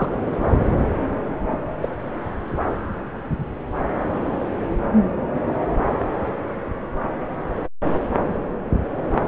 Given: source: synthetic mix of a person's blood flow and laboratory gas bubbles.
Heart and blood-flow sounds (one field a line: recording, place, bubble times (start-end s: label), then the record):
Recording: Doppler ultrasound of blood flow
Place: subclavian vein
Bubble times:
0.00-0.10 s: bubbles
1.51-1.58 s: bubbles
1.82-1.89 s: bubbles
From the record:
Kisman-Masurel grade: 122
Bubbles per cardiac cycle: 1 to 2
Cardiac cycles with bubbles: 10 to 50%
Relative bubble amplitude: moderate (0.250 to 0.450)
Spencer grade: 2 (many but less than half of the cardiac periods contain bubble signals, singularly or in groups)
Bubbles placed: anywhere in the cardiac cycle